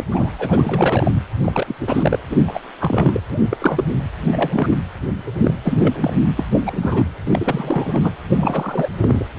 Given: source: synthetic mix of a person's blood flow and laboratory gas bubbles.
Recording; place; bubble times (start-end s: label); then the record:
Doppler ultrasound of blood flow; precordium
0.00-0.04 s: bubbles
0.11-1.11 s: bubbles
1.42-1.75 s: bubbles
1.80-2.19 s: bubbles
2.29-2.59 s: bubbles
2.80-3.20 s: bubbles
3.29-3.84 s: bubbles
3.88-3.95 s: bubbles
4.21-4.67 s: bubbles
4.71-4.76 s: bubbles
5.26-5.30 s: bubbles
5.37-5.55 s: bubbles
5.63-6.12 s: bubbles
6.37-6.45 s: bubbles
6.52-7.06 s: bubbles
7.27-8.12 s: bubbles
8.29-8.88 s: bubbles
9.00-9.26 s: bubbles
From the record:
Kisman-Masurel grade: 332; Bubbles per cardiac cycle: rolling drumbeat, 9 or more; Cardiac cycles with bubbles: 50 to 99%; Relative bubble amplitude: moderate (0.250 to 0.450); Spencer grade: 3 (all of the cardiac periods contain showers or single bubble signals, but not dominating or overriding the cardiac motion signals); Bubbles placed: anywhere in the cardiac cycle